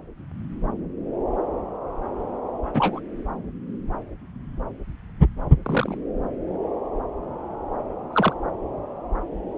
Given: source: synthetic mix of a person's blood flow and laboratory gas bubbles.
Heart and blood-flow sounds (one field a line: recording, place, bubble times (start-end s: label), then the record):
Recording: Doppler ultrasound of blood flow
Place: subclavian vein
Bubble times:
2.73-3.00 s: bubbles
5.62-5.97 s: bubbles
8.12-8.33 s: bubbles
From the record:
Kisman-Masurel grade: 122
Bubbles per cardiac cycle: 1 to 2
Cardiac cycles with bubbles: 10 to 50%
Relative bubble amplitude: moderate (0.250 to 0.450)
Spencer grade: 2 (many but less than half of the cardiac periods contain bubble signals, singularly or in groups)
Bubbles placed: anywhere in the cardiac cycle